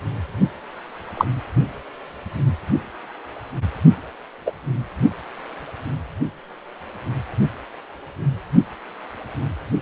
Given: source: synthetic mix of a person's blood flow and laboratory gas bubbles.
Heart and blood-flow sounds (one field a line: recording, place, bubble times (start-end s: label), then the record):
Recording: Doppler ultrasound of blood flow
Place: precordium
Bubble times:
1.17-1.25 s: bubbles
4.46-4.52 s: bubbles
From the record:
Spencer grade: 2 (many but less than half of the cardiac periods contain bubble signals, singularly or in groups)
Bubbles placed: only in the low amplitude regions of the cardiac cycle